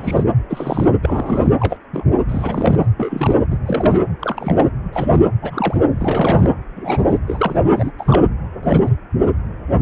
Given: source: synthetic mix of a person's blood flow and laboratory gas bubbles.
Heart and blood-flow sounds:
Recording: Doppler ultrasound of blood flow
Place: precordium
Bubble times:
0.00-0.24 s: bubbles
0.49-0.93 s: bubbles
1.03-1.53 s: bubbles
1.60-1.77 s: bubbles
1.93-2.04 s: bubbles
2.29-2.86 s: bubbles
2.97-3.36 s: bubbles
3.50-3.58 s: bubbles
3.66-3.99 s: bubbles
4.21-4.69 s: bubbles
4.92-5.08 s: bubbles
5.12-5.22 s: bubbles
5.42-5.80 s: bubbles
5.97-6.49 s: bubbles
6.75-7.17 s: bubbles
7.27-7.58 s: bubbles
7.75-7.91 s: bubbles
7.97-8.23 s: bubbles
8.63-8.88 s: bubbles
9.25-9.30 s: bubbles
From the record:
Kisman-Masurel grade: 242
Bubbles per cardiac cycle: several, 3 to 8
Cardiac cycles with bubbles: 100%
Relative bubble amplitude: moderate (0.250 to 0.450)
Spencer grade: 3 (all of the cardiac periods contain showers or single bubble signals, but not dominating or overriding the cardiac motion signals)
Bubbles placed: anywhere in the cardiac cycle

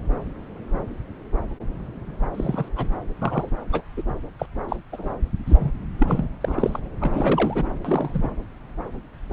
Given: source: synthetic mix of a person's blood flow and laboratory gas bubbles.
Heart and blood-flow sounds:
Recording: Doppler ultrasound of blood flow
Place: subclavian vein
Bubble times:
2.34-2.69 s: bubbles
2.76-2.87 s: bubbles
3.21-3.50 s: bubbles
3.72-3.81 s: bubbles
3.97-4.02 s: bubbles
4.39-4.45 s: bubbles
4.68-4.76 s: bubbles
4.92-5.15 s: bubbles
5.46-5.72 s: bubbles
5.98-6.29 s: bubbles
6.40-6.79 s: bubbles
7.00-7.67 s: bubbles
7.84-8.19 s: bubbles
8.22-8.28 s: bubbles
From the record:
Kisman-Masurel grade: 232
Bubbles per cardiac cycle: several, 3 to 8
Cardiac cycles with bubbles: 50 to 99%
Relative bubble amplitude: moderate (0.250 to 0.450)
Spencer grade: 3 (all of the cardiac periods contain showers or single bubble signals, but not dominating or overriding the cardiac motion signals)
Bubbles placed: anywhere in the cardiac cycle

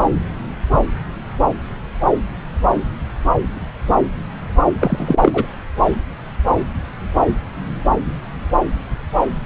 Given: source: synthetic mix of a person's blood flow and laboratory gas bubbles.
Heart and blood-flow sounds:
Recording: Doppler ultrasound of blood flow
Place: subclavian vein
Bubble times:
4.81-5.18 s: bubbles
5.21-5.46 s: bubbles
From the record:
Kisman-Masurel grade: 223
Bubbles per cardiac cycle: several, 3 to 8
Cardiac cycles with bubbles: 10 to 50%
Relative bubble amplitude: loud (0.450 to 0.775)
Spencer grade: 2 (many but less than half of the cardiac periods contain bubble signals, singularly or in groups)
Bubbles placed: anywhere in the cardiac cycle

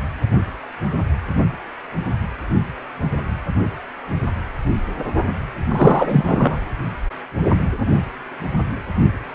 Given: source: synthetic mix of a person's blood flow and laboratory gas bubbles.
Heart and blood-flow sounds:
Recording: Doppler ultrasound of blood flow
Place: precordium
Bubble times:
5.69-6.58 s: bubbles
From the record:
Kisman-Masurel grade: 213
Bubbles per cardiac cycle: several, 3 to 8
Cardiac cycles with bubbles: 1 to 10%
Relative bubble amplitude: loud (0.450 to 0.775)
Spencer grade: 1 (occasional bubble signal discernible with the cardiac motion signal, with majority of cardiac periods free of bubbles)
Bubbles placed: only in the low amplitude regions of the cardiac cycle

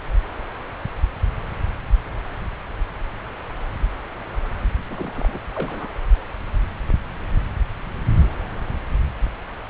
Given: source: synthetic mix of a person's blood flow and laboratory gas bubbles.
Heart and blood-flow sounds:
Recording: Doppler ultrasound of blood flow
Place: subclavian vein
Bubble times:
4.90-5.43 s: bubbles
5.55-5.88 s: bubbles
From the record:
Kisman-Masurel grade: 211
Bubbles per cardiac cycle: several, 3 to 8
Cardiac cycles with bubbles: 1 to 10%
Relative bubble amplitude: barely perceptible (0.100 to 0.250)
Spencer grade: 1 (occasional bubble signal discernible with the cardiac motion signal, with majority of cardiac periods free of bubbles)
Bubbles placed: anywhere in the cardiac cycle

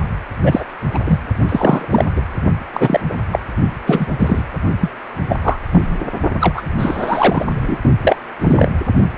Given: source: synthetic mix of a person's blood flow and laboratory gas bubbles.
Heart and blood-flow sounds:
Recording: Doppler ultrasound of blood flow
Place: precordium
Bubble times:
0.43-0.65 s: bubbles
0.94-0.99 s: bubbles
1.05-1.20 s: bubbles
1.49-1.86 s: bubbles
1.91-2.04 s: bubbles
2.16-2.22 s: bubbles
2.73-3.00 s: bubbles
3.09-3.15 s: bubbles
3.31-3.39 s: bubbles
3.86-4.06 s: bubbles
4.19-4.44 s: bubbles
4.80-4.90 s: bubbles
5.29-5.39 s: bubbles
5.42-5.58 s: bubbles
5.72-6.06 s: bubbles
6.40-6.62 s: bubbles
6.78-7.45 s: bubbles
7.53-7.78 s: bubbles
8.02-8.16 s: bubbles
8.39-8.69 s: bubbles
From the record:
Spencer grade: 3 (all of the cardiac periods contain showers or single bubble signals, but not dominating or overriding the cardiac motion signals)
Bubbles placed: only in the low amplitude regions of the cardiac cycle

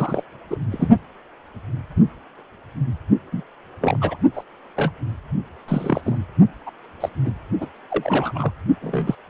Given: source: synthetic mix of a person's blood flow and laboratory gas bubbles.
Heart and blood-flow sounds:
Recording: Doppler ultrasound of blood flow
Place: precordium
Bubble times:
0.00-0.23 s: bubbles
0.51-0.57 s: bubbles
0.71-0.89 s: bubbles
3.32-3.42 s: bubbles
3.81-4.17 s: bubbles
4.34-4.42 s: bubbles
4.76-4.92 s: bubbles
5.68-6.17 s: bubbles
6.66-6.71 s: bubbles
7.00-7.09 s: bubbles
7.25-7.31 s: bubbles
7.60-7.67 s: bubbles
7.90-8.52 s: bubbles
8.82-9.15 s: bubbles
From the record:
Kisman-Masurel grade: 232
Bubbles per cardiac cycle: several, 3 to 8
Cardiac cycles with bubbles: 50 to 99%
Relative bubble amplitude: moderate (0.250 to 0.450)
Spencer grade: 3 (all of the cardiac periods contain showers or single bubble signals, but not dominating or overriding the cardiac motion signals)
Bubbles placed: only in the low amplitude regions of the cardiac cycle

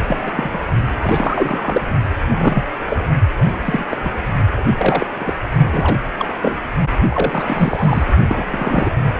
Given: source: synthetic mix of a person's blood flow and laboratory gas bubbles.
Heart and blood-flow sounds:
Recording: Doppler ultrasound of blood flow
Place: precordium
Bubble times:
0.08-0.61 s: bubbles
1.02-1.81 s: bubbles
2.30-2.63 s: bubbles
2.85-3.03 s: bubbles
3.64-3.86 s: bubbles
3.89-3.97 s: bubbles
4.02-4.09 s: bubbles
4.77-5.06 s: bubbles
5.12-5.34 s: bubbles
5.72-5.96 s: bubbles
6.18-6.30 s: bubbles
6.42-6.57 s: bubbles
7.08-8.04 s: bubbles
8.27-8.44 s: bubbles
8.51-8.91 s: bubbles
From the record:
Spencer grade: 3 (all of the cardiac periods contain showers or single bubble signals, but not dominating or overriding the cardiac motion signals)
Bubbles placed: only in the low amplitude regions of the cardiac cycle

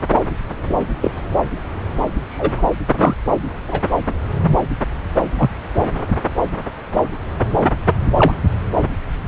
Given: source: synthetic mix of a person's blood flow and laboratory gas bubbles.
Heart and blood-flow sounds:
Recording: Doppler ultrasound of blood flow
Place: subclavian vein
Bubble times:
0.69-0.74 s: bubbles
1.01-1.11 s: bubbles
2.29-2.63 s: bubbles
2.97-3.15 s: bubbles
3.68-3.80 s: bubbles
5.38-5.50 s: bubbles
8.19-8.34 s: bubbles
From the record:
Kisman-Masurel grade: 123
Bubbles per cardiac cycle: 1 to 2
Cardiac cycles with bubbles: 10 to 50%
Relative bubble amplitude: loud (0.450 to 0.775)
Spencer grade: 2 (many but less than half of the cardiac periods contain bubble signals, singularly or in groups)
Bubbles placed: anywhere in the cardiac cycle

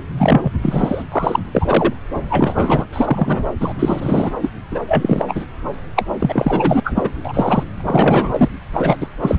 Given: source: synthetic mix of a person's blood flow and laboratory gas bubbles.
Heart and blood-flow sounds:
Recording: Doppler ultrasound of blood flow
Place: subclavian vein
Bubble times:
0.18-0.52 s: bubbles
0.62-1.02 s: bubbles
1.11-1.40 s: bubbles
1.51-1.93 s: bubbles
2.17-2.87 s: bubbles
2.92-3.52 s: bubbles
3.60-3.74 s: bubbles
3.79-4.33 s: bubbles
4.40-4.50 s: bubbles
4.71-4.80 s: bubbles
4.88-5.25 s: bubbles
5.28-5.45 s: bubbles
5.96-6.04 s: bubbles
6.20-6.80 s: bubbles
6.84-7.10 s: bubbles
7.23-7.63 s: bubbles
7.75-8.49 s: bubbles
8.73-8.97 s: bubbles
9.00-9.07 s: bubbles
9.22-9.36 s: bubbles
From the record:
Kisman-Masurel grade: 343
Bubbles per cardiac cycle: rolling drumbeat, 9 or more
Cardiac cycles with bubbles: 100%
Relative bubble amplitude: loud (0.450 to 0.775)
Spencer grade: 3 (all of the cardiac periods contain showers or single bubble signals, but not dominating or overriding the cardiac motion signals)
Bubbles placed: anywhere in the cardiac cycle

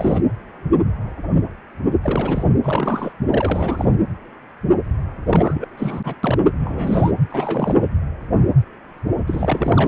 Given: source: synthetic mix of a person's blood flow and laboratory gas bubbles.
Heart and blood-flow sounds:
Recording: Doppler ultrasound of blood flow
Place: precordium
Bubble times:
0.00-0.20 s: bubbles
2.03-2.45 s: bubbles
2.63-3.14 s: bubbles
3.31-3.96 s: bubbles
5.27-5.68 s: bubbles
5.77-6.16 s: bubbles
6.23-6.38 s: bubbles
6.59-7.12 s: bubbles
7.31-7.78 s: bubbles
9.27-9.88 s: bubbles
From the record:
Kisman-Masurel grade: 332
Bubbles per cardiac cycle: rolling drumbeat, 9 or more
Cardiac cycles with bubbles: 50 to 99%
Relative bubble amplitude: moderate (0.250 to 0.450)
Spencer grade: 3 (all of the cardiac periods contain showers or single bubble signals, but not dominating or overriding the cardiac motion signals)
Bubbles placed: anywhere in the cardiac cycle

